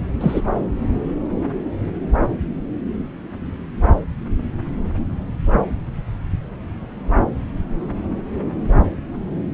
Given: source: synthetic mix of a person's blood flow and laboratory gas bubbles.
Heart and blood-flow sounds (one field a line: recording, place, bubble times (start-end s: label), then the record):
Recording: Doppler ultrasound of blood flow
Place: subclavian vein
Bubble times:
0.20-0.41 s: bubbles
From the record:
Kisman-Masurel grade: 113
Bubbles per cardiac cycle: 1 to 2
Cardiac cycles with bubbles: 1 to 10%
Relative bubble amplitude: loud (0.450 to 0.775)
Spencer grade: 1 (occasional bubble signal discernible with the cardiac motion signal, with majority of cardiac periods free of bubbles)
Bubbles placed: anywhere in the cardiac cycle